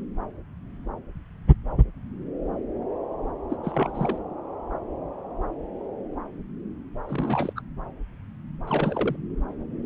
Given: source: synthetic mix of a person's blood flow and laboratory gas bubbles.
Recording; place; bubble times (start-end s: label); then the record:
Doppler ultrasound of blood flow; subclavian vein
3.50-3.56 s: bubbles
3.63-4.18 s: bubbles
7.05-7.53 s: bubbles
7.55-7.62 s: bubbles
8.67-9.16 s: bubbles
From the record:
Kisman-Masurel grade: 221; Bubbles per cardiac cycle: several, 3 to 8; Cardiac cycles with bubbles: 10 to 50%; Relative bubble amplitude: barely perceptible (0.100 to 0.250); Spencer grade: 2 (many but less than half of the cardiac periods contain bubble signals, singularly or in groups); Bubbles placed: anywhere in the cardiac cycle